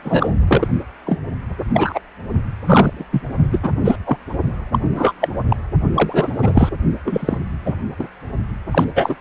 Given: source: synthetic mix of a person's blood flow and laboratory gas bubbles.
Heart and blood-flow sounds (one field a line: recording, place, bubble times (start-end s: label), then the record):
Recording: Doppler ultrasound of blood flow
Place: precordium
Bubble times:
0.04-0.67 s: bubbles
1.06-1.20 s: bubbles
1.73-2.00 s: bubbles
2.65-3.05 s: bubbles
3.11-3.22 s: bubbles
3.52-3.58 s: bubbles
3.62-3.72 s: bubbles
3.84-3.96 s: bubbles
4.05-4.17 s: bubbles
4.71-4.79 s: bubbles
4.96-5.13 s: bubbles
5.21-5.28 s: bubbles
5.50-5.56 s: bubbles
5.94-6.70 s: bubbles
7.05-7.38 s: bubbles
7.66-7.75 s: bubbles
7.99-8.08 s: bubbles
8.71-8.85 s: bubbles
8.95-9.16 s: bubbles
From the record:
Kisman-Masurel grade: 243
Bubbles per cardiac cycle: several, 3 to 8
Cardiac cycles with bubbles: 100%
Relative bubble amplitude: loud (0.450 to 0.775)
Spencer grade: 3 (all of the cardiac periods contain showers or single bubble signals, but not dominating or overriding the cardiac motion signals)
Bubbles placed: only in the low amplitude regions of the cardiac cycle